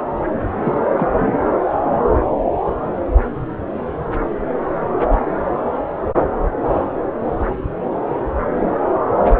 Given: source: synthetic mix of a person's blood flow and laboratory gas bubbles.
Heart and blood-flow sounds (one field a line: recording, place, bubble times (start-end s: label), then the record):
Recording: Doppler ultrasound of blood flow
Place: subclavian vein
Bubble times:
0.63-0.78 s: bubbles
0.97-1.08 s: bubbles
1.18-1.39 s: bubbles
From the record:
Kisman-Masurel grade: 212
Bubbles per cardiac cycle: several, 3 to 8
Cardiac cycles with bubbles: 1 to 10%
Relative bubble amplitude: moderate (0.250 to 0.450)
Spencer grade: 1 (occasional bubble signal discernible with the cardiac motion signal, with majority of cardiac periods free of bubbles)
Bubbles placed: anywhere in the cardiac cycle